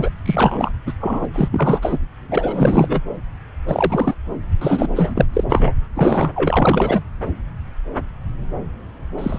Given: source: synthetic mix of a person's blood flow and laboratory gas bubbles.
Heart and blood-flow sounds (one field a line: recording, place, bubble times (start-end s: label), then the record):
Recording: Doppler ultrasound of blood flow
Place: subclavian vein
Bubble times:
0.00-0.10 s: bubbles
0.25-0.72 s: bubbles
0.86-0.93 s: bubbles
1.00-1.26 s: bubbles
1.32-1.99 s: bubbles
2.31-3.00 s: bubbles
3.67-4.14 s: bubbles
4.61-4.88 s: bubbles
4.96-5.25 s: bubbles
5.33-5.44 s: bubbles
5.49-5.73 s: bubbles
5.95-6.31 s: bubbles
6.36-7.02 s: bubbles
9.18-9.38 s: bubbles
From the record:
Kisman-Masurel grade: 333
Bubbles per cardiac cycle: rolling drumbeat, 9 or more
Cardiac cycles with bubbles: 50 to 99%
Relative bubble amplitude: loud (0.450 to 0.775)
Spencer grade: 3 (all of the cardiac periods contain showers or single bubble signals, but not dominating or overriding the cardiac motion signals)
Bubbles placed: anywhere in the cardiac cycle